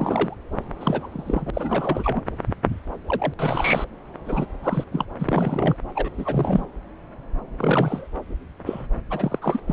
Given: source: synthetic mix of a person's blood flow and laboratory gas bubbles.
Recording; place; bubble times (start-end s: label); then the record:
Doppler ultrasound of blood flow; subclavian vein
0.00-0.38 s: bubbles
0.80-1.09 s: bubbles
1.11-1.50 s: bubbles
1.53-2.21 s: bubbles
3.06-3.88 s: bubbles
4.25-4.46 s: bubbles
4.62-4.84 s: bubbles
4.92-5.05 s: bubbles
5.19-5.76 s: bubbles
5.95-6.10 s: bubbles
6.17-6.66 s: bubbles
7.57-8.07 s: bubbles
8.65-8.87 s: bubbles
9.10-9.39 s: bubbles
9.41-9.60 s: bubbles
9.67-9.73 s: bubbles
From the record:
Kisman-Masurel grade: 333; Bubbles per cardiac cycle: rolling drumbeat, 9 or more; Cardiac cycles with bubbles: 50 to 99%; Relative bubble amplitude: loud (0.450 to 0.775); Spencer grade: 3 (all of the cardiac periods contain showers or single bubble signals, but not dominating or overriding the cardiac motion signals); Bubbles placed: anywhere in the cardiac cycle